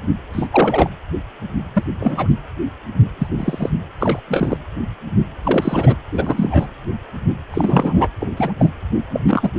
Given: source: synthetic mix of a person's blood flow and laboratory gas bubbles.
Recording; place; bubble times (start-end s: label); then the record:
Doppler ultrasound of blood flow; precordium
0.33-0.48 s: bubbles
0.52-0.90 s: bubbles
1.73-1.84 s: bubbles
2.00-2.34 s: bubbles
3.19-3.27 s: bubbles
3.38-3.71 s: bubbles
4.00-4.19 s: bubbles
4.28-4.58 s: bubbles
5.43-5.95 s: bubbles
6.12-6.70 s: bubbles
7.54-8.08 s: bubbles
8.20-8.29 s: bubbles
8.37-8.53 s: bubbles
8.58-8.71 s: bubbles
9.12-9.20 s: bubbles
9.27-9.50 s: bubbles
From the record:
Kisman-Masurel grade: 233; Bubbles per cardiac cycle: several, 3 to 8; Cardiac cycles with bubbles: 50 to 99%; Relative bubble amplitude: loud (0.450 to 0.775); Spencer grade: 3 (all of the cardiac periods contain showers or single bubble signals, but not dominating or overriding the cardiac motion signals); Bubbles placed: anywhere in the cardiac cycle